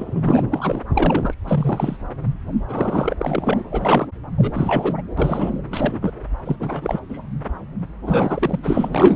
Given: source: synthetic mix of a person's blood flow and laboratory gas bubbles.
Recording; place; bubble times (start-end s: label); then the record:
Doppler ultrasound of blood flow; subclavian vein
0.00-0.44 s: bubbles
0.52-0.82 s: bubbles
0.94-1.35 s: bubbles
1.45-1.97 s: bubbles
2.68-3.17 s: bubbles
3.21-3.64 s: bubbles
3.71-4.07 s: bubbles
4.38-4.94 s: bubbles
4.97-5.02 s: bubbles
5.17-5.59 s: bubbles
5.71-6.00 s: bubbles
6.02-6.11 s: bubbles
6.45-6.56 s: bubbles
6.59-7.00 s: bubbles
7.09-7.21 s: bubbles
8.06-8.59 s: bubbles
8.63-9.15 s: bubbles
From the record:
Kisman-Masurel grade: 332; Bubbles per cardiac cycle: rolling drumbeat, 9 or more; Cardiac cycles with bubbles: 50 to 99%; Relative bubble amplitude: moderate (0.250 to 0.450); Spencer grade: 3 (all of the cardiac periods contain showers or single bubble signals, but not dominating or overriding the cardiac motion signals); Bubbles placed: anywhere in the cardiac cycle